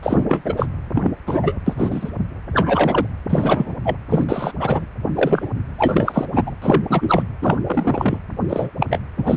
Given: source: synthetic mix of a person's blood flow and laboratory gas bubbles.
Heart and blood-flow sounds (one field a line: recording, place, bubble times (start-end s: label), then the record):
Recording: Doppler ultrasound of blood flow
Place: precordium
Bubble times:
0.02-0.24 s: bubbles
0.29-0.54 s: bubbles
0.56-0.66 s: bubbles
0.95-1.13 s: bubbles
1.26-1.57 s: bubbles
1.66-2.11 s: bubbles
2.54-3.07 s: bubbles
3.29-3.75 s: bubbles
3.84-3.96 s: bubbles
4.09-4.25 s: bubbles
4.29-4.52 s: bubbles
4.59-4.87 s: bubbles
5.15-5.48 s: bubbles
5.78-6.25 s: bubbles
6.33-6.51 s: bubbles
6.62-6.83 s: bubbles
6.89-7.23 s: bubbles
7.42-7.58 s: bubbles
7.66-8.18 s: bubbles
8.49-8.71 s: bubbles
8.79-8.87 s: bubbles
8.90-8.99 s: bubbles
9.18-9.37 s: bubbles
From the record:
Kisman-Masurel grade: 233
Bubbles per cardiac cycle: several, 3 to 8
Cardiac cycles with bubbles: 50 to 99%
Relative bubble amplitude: loud (0.450 to 0.775)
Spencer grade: 3 (all of the cardiac periods contain showers or single bubble signals, but not dominating or overriding the cardiac motion signals)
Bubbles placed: anywhere in the cardiac cycle